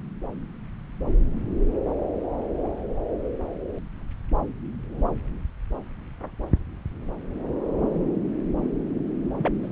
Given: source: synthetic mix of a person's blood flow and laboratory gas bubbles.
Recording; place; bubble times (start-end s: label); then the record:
Doppler ultrasound of blood flow; subclavian vein
9.37-9.68 s: bubbles
From the record:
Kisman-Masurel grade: 221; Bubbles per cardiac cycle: several, 3 to 8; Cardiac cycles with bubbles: 10 to 50%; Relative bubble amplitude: barely perceptible (0.100 to 0.250); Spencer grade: 2 (many but less than half of the cardiac periods contain bubble signals, singularly or in groups); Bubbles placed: anywhere in the cardiac cycle